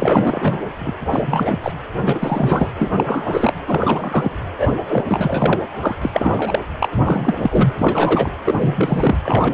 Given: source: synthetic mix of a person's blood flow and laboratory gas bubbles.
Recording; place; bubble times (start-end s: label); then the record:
Doppler ultrasound of blood flow; precordium
0.00-0.57 s: bubbles
0.79-0.91 s: bubbles
1.10-1.60 s: bubbles
1.62-1.73 s: bubbles
2.05-2.77 s: bubbles
2.79-3.53 s: bubbles
3.65-4.39 s: bubbles
4.57-4.69 s: bubbles
4.88-5.04 s: bubbles
5.08-5.59 s: bubbles
5.80-5.96 s: bubbles
6.01-6.09 s: bubbles
6.12-6.59 s: bubbles
6.79-7.75 s: bubbles
7.78-8.30 s: bubbles
8.44-9.17 s: bubbles
9.22-9.54 s: bubbles
From the record:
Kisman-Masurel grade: 343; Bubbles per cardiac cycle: rolling drumbeat, 9 or more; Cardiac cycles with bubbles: 100%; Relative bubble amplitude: loud (0.450 to 0.775); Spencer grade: 3 (all of the cardiac periods contain showers or single bubble signals, but not dominating or overriding the cardiac motion signals); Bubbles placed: anywhere in the cardiac cycle